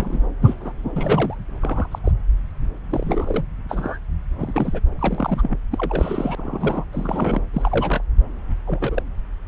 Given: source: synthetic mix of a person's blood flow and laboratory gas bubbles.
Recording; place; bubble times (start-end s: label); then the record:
Doppler ultrasound of blood flow; subclavian vein
0.00-0.28 s: bubbles
0.41-0.55 s: bubbles
0.60-0.73 s: bubbles
0.95-1.36 s: bubbles
1.61-1.89 s: bubbles
1.91-1.99 s: bubbles
2.04-2.12 s: bubbles
2.90-3.43 s: bubbles
3.69-3.98 s: bubbles
4.38-4.80 s: bubbles
4.99-5.56 s: bubbles
5.71-6.84 s: bubbles
6.92-7.41 s: bubbles
7.53-8.03 s: bubbles
8.67-9.03 s: bubbles
From the record:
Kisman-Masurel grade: 232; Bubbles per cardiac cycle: several, 3 to 8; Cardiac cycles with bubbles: 50 to 99%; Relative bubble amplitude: moderate (0.250 to 0.450); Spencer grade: 3 (all of the cardiac periods contain showers or single bubble signals, but not dominating or overriding the cardiac motion signals); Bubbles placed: anywhere in the cardiac cycle